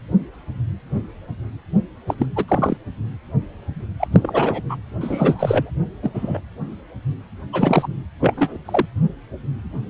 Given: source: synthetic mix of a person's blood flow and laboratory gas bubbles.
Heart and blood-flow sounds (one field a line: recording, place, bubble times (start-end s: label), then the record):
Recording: Doppler ultrasound of blood flow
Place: precordium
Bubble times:
2.08-2.14 s: bubbles
2.18-2.26 s: bubbles
2.35-2.45 s: bubbles
2.48-2.77 s: bubbles
4.00-4.07 s: bubbles
4.12-4.61 s: bubbles
4.69-4.76 s: bubbles
5.00-5.70 s: bubbles
6.02-6.10 s: bubbles
6.14-6.40 s: bubbles
7.52-7.88 s: bubbles
8.20-8.33 s: bubbles
8.37-8.57 s: bubbles
8.65-8.86 s: bubbles
From the record:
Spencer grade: 2 (many but less than half of the cardiac periods contain bubble signals, singularly or in groups)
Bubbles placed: anywhere in the cardiac cycle